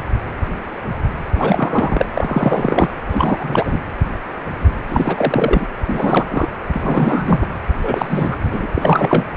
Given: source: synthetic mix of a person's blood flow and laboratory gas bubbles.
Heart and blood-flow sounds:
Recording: Doppler ultrasound of blood flow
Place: precordium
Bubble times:
1.34-2.06 s: bubbles
2.15-2.91 s: bubbles
3.06-3.80 s: bubbles
4.88-5.67 s: bubbles
5.86-6.25 s: bubbles
6.29-6.47 s: bubbles
6.73-7.38 s: bubbles
7.41-7.47 s: bubbles
7.83-8.38 s: bubbles
8.41-8.66 s: bubbles
8.75-9.26 s: bubbles
From the record:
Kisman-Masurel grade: 333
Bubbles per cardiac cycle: rolling drumbeat, 9 or more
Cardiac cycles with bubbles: 50 to 99%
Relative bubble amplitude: loud (0.450 to 0.775)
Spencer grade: 3 (all of the cardiac periods contain showers or single bubble signals, but not dominating or overriding the cardiac motion signals)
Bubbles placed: anywhere in the cardiac cycle

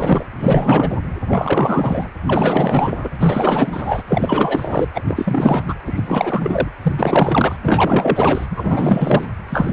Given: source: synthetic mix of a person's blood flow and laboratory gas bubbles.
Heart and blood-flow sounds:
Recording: Doppler ultrasound of blood flow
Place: precordium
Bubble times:
0.00-0.25 s: bubbles
0.38-0.97 s: bubbles
1.27-2.09 s: bubbles
2.26-3.09 s: bubbles
3.19-4.02 s: bubbles
4.07-4.88 s: bubbles
4.94-5.02 s: bubbles
5.08-5.74 s: bubbles
5.87-6.69 s: bubbles
6.82-6.93 s: bubbles
6.98-7.58 s: bubbles
7.63-8.46 s: bubbles
8.50-9.26 s: bubbles
9.49-9.73 s: bubbles
From the record:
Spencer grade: 4 (maximum detectable bubble signal sounding continuously throughout systole and diastole of every cardiac period, and overriding the amplitude of the normal cardiac signals)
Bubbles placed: anywhere in the cardiac cycle

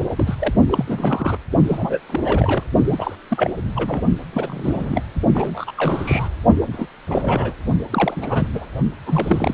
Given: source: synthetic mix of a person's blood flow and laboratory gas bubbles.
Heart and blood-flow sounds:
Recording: Doppler ultrasound of blood flow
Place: precordium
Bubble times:
0.00-0.03 s: bubbles
0.08-0.36 s: bubbles
0.39-0.53 s: bubbles
0.69-1.38 s: bubbles
1.68-1.99 s: bubbles
2.08-2.64 s: bubbles
2.85-3.16 s: bubbles
3.28-3.59 s: bubbles
3.75-4.06 s: bubbles
4.33-5.02 s: bubbles
5.15-5.21 s: bubbles
5.33-5.72 s: bubbles
5.75-6.29 s: bubbles
6.61-6.66 s: bubbles
6.72-6.87 s: bubbles
7.08-7.54 s: bubbles
7.90-8.49 s: bubbles
8.53-8.66 s: bubbles
9.06-9.54 s: bubbles
From the record:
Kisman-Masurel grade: 332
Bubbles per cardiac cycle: rolling drumbeat, 9 or more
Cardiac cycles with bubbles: 50 to 99%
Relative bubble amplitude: moderate (0.250 to 0.450)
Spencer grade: 3 (all of the cardiac periods contain showers or single bubble signals, but not dominating or overriding the cardiac motion signals)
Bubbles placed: only in the low amplitude regions of the cardiac cycle

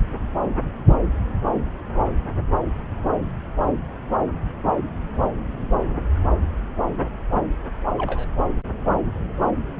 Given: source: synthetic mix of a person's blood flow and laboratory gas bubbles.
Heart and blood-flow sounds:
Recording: Doppler ultrasound of blood flow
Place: subclavian vein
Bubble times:
7.98-8.26 s: bubbles
From the record:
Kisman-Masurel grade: 111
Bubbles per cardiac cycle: 1 to 2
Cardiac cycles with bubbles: 1 to 10%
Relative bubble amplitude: barely perceptible (0.100 to 0.250)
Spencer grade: 1 (occasional bubble signal discernible with the cardiac motion signal, with majority of cardiac periods free of bubbles)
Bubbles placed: anywhere in the cardiac cycle

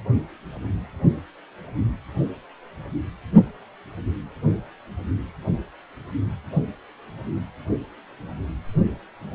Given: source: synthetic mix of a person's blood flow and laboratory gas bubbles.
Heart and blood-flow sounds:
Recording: Doppler ultrasound of blood flow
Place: precordium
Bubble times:
no bubbles
From the record:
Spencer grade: 0 (complete lack of bubble signals)

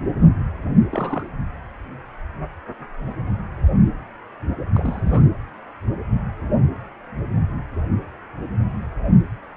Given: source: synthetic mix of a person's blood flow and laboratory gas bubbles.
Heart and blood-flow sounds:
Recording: Doppler ultrasound of blood flow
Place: precordium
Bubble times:
0.91-1.28 s: bubbles
4.74-5.23 s: bubbles
From the record:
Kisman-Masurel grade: 211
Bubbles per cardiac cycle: several, 3 to 8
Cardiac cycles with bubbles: 1 to 10%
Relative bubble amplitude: barely perceptible (0.100 to 0.250)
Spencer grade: 1 (occasional bubble signal discernible with the cardiac motion signal, with majority of cardiac periods free of bubbles)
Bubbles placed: anywhere in the cardiac cycle

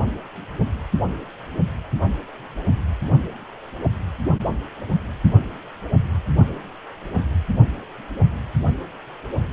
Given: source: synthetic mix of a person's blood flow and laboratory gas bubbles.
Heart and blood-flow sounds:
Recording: Doppler ultrasound of blood flow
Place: precordium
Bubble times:
no bubbles
From the record:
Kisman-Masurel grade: 000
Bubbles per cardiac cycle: 0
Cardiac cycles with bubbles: 0%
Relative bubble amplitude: no bubbles discernible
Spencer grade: 0 (complete lack of bubble signals)

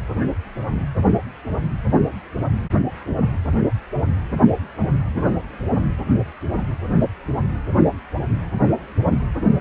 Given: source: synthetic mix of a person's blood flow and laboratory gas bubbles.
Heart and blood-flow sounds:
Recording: Doppler ultrasound of blood flow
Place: precordium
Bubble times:
no bubbles
From the record:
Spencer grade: 0 (complete lack of bubble signals)

